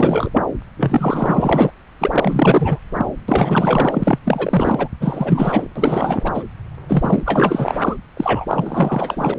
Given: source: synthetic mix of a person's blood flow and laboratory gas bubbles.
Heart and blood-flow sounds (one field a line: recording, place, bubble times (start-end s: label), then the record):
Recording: Doppler ultrasound of blood flow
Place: subclavian vein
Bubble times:
0.00-0.29 s: bubbles
0.34-0.42 s: bubbles
0.77-1.71 s: bubbles
2.00-2.78 s: bubbles
2.93-3.05 s: bubbles
3.28-4.19 s: bubbles
4.25-4.88 s: bubbles
5.00-5.66 s: bubbles
5.75-6.31 s: bubbles
6.34-6.43 s: bubbles
6.87-7.75 s: bubbles
7.81-7.96 s: bubbles
8.17-9.34 s: bubbles
From the record:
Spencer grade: 4 (maximum detectable bubble signal sounding continuously throughout systole and diastole of every cardiac period, and overriding the amplitude of the normal cardiac signals)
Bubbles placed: anywhere in the cardiac cycle